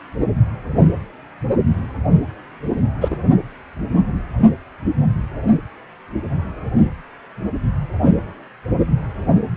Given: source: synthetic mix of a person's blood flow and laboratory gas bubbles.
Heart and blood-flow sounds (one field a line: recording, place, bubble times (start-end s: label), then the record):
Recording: Doppler ultrasound of blood flow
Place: precordium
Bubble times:
3.00-3.16 s: bubbles
From the record:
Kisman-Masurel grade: 113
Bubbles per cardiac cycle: 1 to 2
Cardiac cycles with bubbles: 1 to 10%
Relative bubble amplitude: loud (0.450 to 0.775)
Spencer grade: 1 (occasional bubble signal discernible with the cardiac motion signal, with majority of cardiac periods free of bubbles)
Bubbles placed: anywhere in the cardiac cycle